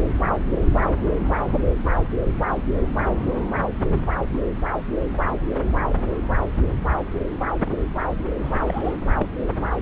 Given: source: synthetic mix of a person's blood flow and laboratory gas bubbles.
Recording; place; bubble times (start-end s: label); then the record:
Doppler ultrasound of blood flow; subclavian vein
1.19-1.28 s: bubbles
4.27-4.43 s: bubbles
7.65-7.75 s: bubbles
8.19-8.23 s: bubbles
8.44-8.94 s: bubbles
9.15-9.27 s: bubbles
From the record:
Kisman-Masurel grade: 121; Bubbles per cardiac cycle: 1 to 2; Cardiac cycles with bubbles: 10 to 50%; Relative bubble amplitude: barely perceptible (0.100 to 0.250); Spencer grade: 2 (many but less than half of the cardiac periods contain bubble signals, singularly or in groups); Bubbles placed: anywhere in the cardiac cycle